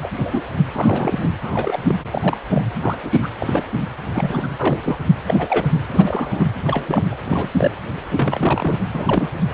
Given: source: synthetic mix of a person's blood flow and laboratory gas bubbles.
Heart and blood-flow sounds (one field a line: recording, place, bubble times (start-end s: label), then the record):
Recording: Doppler ultrasound of blood flow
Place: precordium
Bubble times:
0.00-0.12 s: bubbles
0.18-0.42 s: bubbles
0.72-1.31 s: bubbles
1.44-1.84 s: bubbles
1.87-1.96 s: bubbles
2.12-2.38 s: bubbles
2.50-2.62 s: bubbles
2.81-2.97 s: bubbles
3.02-3.29 s: bubbles
3.40-3.67 s: bubbles
4.14-4.48 s: bubbles
4.58-5.08 s: bubbles
5.26-5.73 s: bubbles
5.92-6.50 s: bubbles
6.64-7.16 s: bubbles
7.25-7.51 s: bubbles
7.58-7.71 s: bubbles
8.11-8.77 s: bubbles
8.94-9.29 s: bubbles
From the record:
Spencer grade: 3 (all of the cardiac periods contain showers or single bubble signals, but not dominating or overriding the cardiac motion signals)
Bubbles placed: anywhere in the cardiac cycle